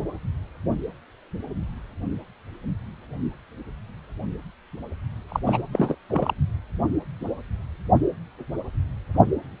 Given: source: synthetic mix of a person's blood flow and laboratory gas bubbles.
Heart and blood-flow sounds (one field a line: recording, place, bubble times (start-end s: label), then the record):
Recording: Doppler ultrasound of blood flow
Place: precordium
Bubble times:
5.29-5.40 s: bubbles
5.46-5.62 s: bubbles
5.73-5.95 s: bubbles
6.09-6.34 s: bubbles
From the record:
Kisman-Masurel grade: 222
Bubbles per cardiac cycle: several, 3 to 8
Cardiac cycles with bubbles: 10 to 50%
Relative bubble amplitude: moderate (0.250 to 0.450)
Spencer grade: 2 (many but less than half of the cardiac periods contain bubble signals, singularly or in groups)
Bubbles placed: only in the low amplitude regions of the cardiac cycle